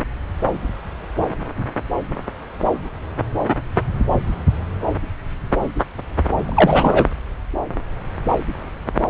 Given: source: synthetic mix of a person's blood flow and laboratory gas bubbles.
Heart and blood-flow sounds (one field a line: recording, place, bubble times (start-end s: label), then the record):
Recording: Doppler ultrasound of blood flow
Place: subclavian vein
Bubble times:
6.44-7.05 s: bubbles
From the record:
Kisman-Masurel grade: 213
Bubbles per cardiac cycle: several, 3 to 8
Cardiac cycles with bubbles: 1 to 10%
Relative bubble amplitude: loud (0.450 to 0.775)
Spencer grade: 1 (occasional bubble signal discernible with the cardiac motion signal, with majority of cardiac periods free of bubbles)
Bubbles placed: anywhere in the cardiac cycle